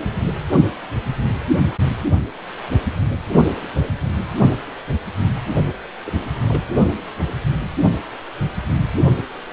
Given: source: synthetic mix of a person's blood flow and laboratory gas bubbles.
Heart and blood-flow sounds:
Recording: Doppler ultrasound of blood flow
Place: precordium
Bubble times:
6.04-6.25 s: bubbles
6.49-6.63 s: bubbles
From the record:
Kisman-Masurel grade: 111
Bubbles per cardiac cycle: 1 to 2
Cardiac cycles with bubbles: 1 to 10%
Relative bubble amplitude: barely perceptible (0.100 to 0.250)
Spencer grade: 1 (occasional bubble signal discernible with the cardiac motion signal, with majority of cardiac periods free of bubbles)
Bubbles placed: only in the low amplitude regions of the cardiac cycle

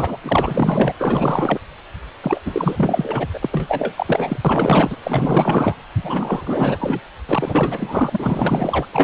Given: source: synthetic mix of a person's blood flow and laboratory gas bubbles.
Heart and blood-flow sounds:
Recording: Doppler ultrasound of blood flow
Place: precordium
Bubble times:
0.00-0.17 s: bubbles
0.22-0.94 s: bubbles
0.98-1.59 s: bubbles
2.23-2.41 s: bubbles
2.45-3.25 s: bubbles
3.33-3.39 s: bubbles
3.42-4.37 s: bubbles
4.45-4.97 s: bubbles
5.04-5.74 s: bubbles
6.03-7.00 s: bubbles
7.28-8.86 s: bubbles
8.92-9.04 s: bubbles
From the record:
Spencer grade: 4 (maximum detectable bubble signal sounding continuously throughout systole and diastole of every cardiac period, and overriding the amplitude of the normal cardiac signals)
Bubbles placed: anywhere in the cardiac cycle

